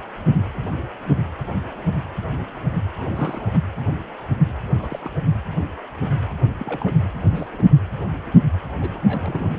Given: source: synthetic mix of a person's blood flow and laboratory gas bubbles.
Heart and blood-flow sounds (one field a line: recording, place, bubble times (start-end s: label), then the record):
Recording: Doppler ultrasound of blood flow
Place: precordium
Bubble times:
2.98-3.48 s: bubbles
3.53-3.59 s: bubbles
4.79-5.10 s: bubbles
6.30-6.33 s: bubbles
6.60-7.02 s: bubbles
7.20-7.69 s: bubbles
8.80-8.91 s: bubbles
8.94-9.49 s: bubbles
From the record:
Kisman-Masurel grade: 221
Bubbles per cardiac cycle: several, 3 to 8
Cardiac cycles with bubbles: 10 to 50%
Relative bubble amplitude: barely perceptible (0.100 to 0.250)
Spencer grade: 2 (many but less than half of the cardiac periods contain bubble signals, singularly or in groups)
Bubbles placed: anywhere in the cardiac cycle